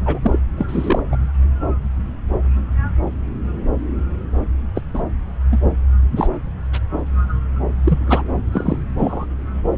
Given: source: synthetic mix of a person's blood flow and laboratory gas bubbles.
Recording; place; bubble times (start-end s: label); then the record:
Doppler ultrasound of blood flow; subclavian vein
0.05-0.19 s: bubbles
0.22-0.39 s: bubbles
0.57-1.03 s: bubbles
1.11-1.16 s: bubbles
4.75-4.82 s: bubbles
4.93-5.02 s: bubbles
5.51-5.58 s: bubbles
6.16-6.28 s: bubbles
6.72-6.79 s: bubbles
7.83-7.99 s: bubbles
8.07-8.22 s: bubbles
8.52-8.78 s: bubbles
8.98-9.26 s: bubbles
From the record:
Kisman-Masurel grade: 232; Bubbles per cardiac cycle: several, 3 to 8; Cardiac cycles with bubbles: 50 to 99%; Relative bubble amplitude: moderate (0.250 to 0.450); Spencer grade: 3 (all of the cardiac periods contain showers or single bubble signals, but not dominating or overriding the cardiac motion signals); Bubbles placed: anywhere in the cardiac cycle